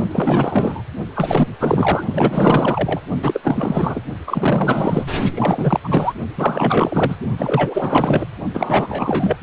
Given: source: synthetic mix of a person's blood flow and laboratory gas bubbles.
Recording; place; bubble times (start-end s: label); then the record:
Doppler ultrasound of blood flow; precordium
0.12-0.82 s: bubbles
1.15-1.48 s: bubbles
1.59-2.04 s: bubbles
2.13-3.00 s: bubbles
3.19-3.41 s: bubbles
3.43-4.03 s: bubbles
4.27-5.07 s: bubbles
5.34-5.80 s: bubbles
5.83-6.13 s: bubbles
6.37-7.17 s: bubbles
7.38-8.25 s: bubbles
8.54-9.37 s: bubbles
From the record:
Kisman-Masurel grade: 444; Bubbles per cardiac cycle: continuous sound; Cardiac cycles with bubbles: 100%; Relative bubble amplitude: maximal (0.775 to 0.999); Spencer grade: 4 (maximum detectable bubble signal sounding continuously throughout systole and diastole of every cardiac period, and overriding the amplitude of the normal cardiac signals); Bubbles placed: only in the low amplitude regions of the cardiac cycle